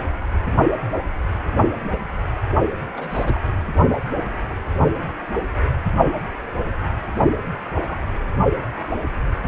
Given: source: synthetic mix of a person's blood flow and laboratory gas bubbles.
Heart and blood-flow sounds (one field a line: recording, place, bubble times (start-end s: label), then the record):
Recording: Doppler ultrasound of blood flow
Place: precordium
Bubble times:
2.96-3.39 s: bubbles
7.82-8.00 s: bubbles
From the record:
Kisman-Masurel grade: 121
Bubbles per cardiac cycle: 1 to 2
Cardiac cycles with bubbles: 10 to 50%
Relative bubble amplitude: barely perceptible (0.100 to 0.250)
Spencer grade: 2 (many but less than half of the cardiac periods contain bubble signals, singularly or in groups)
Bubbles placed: only in the low amplitude regions of the cardiac cycle